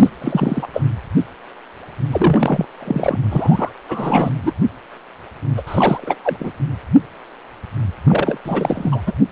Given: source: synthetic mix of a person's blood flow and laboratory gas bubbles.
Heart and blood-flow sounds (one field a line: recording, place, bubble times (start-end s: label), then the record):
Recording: Doppler ultrasound of blood flow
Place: precordium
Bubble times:
0.00-0.10 s: bubbles
0.21-0.67 s: bubbles
0.73-0.82 s: bubbles
2.12-2.65 s: bubbles
2.80-3.18 s: bubbles
3.30-3.70 s: bubbles
3.88-4.30 s: bubbles
4.42-4.51 s: bubbles
5.57-5.62 s: bubbles
5.67-6.18 s: bubbles
6.24-6.52 s: bubbles
8.06-8.38 s: bubbles
8.45-9.01 s: bubbles
9.06-9.13 s: bubbles
From the record:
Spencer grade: 3 (all of the cardiac periods contain showers or single bubble signals, but not dominating or overriding the cardiac motion signals)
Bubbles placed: anywhere in the cardiac cycle